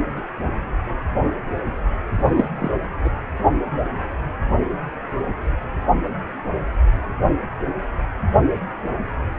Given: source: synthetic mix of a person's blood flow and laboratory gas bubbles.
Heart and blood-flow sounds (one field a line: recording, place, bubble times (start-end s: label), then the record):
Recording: Doppler ultrasound of blood flow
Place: precordium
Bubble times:
2.13-2.47 s: bubbles
2.56-2.71 s: bubbles
3.04-3.09 s: bubbles
From the record:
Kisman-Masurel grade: 212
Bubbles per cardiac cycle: several, 3 to 8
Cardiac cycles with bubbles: 1 to 10%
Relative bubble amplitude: moderate (0.250 to 0.450)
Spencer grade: 1 (occasional bubble signal discernible with the cardiac motion signal, with majority of cardiac periods free of bubbles)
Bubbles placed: anywhere in the cardiac cycle